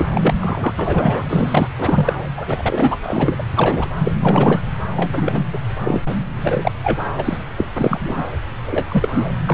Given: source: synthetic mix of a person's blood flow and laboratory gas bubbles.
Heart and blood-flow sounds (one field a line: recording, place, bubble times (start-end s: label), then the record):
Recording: Doppler ultrasound of blood flow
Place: subclavian vein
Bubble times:
0.00-0.08 s: bubbles
0.14-0.35 s: bubbles
0.40-0.73 s: bubbles
0.76-1.68 s: bubbles
1.77-2.13 s: bubbles
2.37-2.96 s: bubbles
3.06-3.44 s: bubbles
3.56-3.88 s: bubbles
3.95-4.13 s: bubbles
4.20-4.60 s: bubbles
4.96-5.46 s: bubbles
5.53-5.58 s: bubbles
5.83-6.00 s: bubbles
6.43-6.71 s: bubbles
6.83-6.97 s: bubbles
7.17-7.38 s: bubbles
7.57-7.65 s: bubbles
7.76-8.28 s: bubbles
8.67-9.30 s: bubbles
9.47-9.54 s: bubbles
From the record:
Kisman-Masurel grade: 243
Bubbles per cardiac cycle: several, 3 to 8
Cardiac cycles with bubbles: 100%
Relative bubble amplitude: loud (0.450 to 0.775)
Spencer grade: 3 (all of the cardiac periods contain showers or single bubble signals, but not dominating or overriding the cardiac motion signals)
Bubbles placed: anywhere in the cardiac cycle